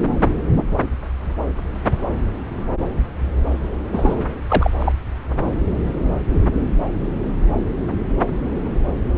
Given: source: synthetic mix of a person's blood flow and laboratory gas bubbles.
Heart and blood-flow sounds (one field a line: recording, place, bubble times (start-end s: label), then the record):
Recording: Doppler ultrasound of blood flow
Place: subclavian vein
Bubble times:
3.92-4.26 s: bubbles
4.49-4.71 s: bubbles
4.79-4.92 s: bubbles
From the record:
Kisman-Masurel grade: 213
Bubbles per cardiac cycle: several, 3 to 8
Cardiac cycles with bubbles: 1 to 10%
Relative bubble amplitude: loud (0.450 to 0.775)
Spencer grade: 1 (occasional bubble signal discernible with the cardiac motion signal, with majority of cardiac periods free of bubbles)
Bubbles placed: anywhere in the cardiac cycle